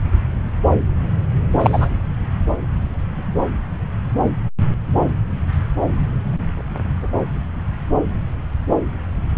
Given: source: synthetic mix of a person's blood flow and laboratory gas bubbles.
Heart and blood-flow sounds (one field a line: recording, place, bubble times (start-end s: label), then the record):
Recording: Doppler ultrasound of blood flow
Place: subclavian vein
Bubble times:
1.59-1.89 s: bubbles
From the record:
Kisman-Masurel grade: 123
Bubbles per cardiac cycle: 1 to 2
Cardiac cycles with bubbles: 10 to 50%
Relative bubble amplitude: loud (0.450 to 0.775)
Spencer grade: 2 (many but less than half of the cardiac periods contain bubble signals, singularly or in groups)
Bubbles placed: anywhere in the cardiac cycle